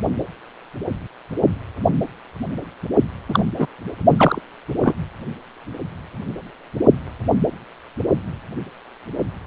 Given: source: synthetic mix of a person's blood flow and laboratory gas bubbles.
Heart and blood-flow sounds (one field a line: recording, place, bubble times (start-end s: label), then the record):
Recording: Doppler ultrasound of blood flow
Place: precordium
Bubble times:
3.28-3.44 s: bubbles
3.58-3.67 s: bubbles
4.16-4.42 s: bubbles
4.83-4.93 s: bubbles
From the record:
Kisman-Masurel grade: 223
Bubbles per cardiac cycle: several, 3 to 8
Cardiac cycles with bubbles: 10 to 50%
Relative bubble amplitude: loud (0.450 to 0.775)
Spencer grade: 2 (many but less than half of the cardiac periods contain bubble signals, singularly or in groups)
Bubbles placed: only in the low amplitude regions of the cardiac cycle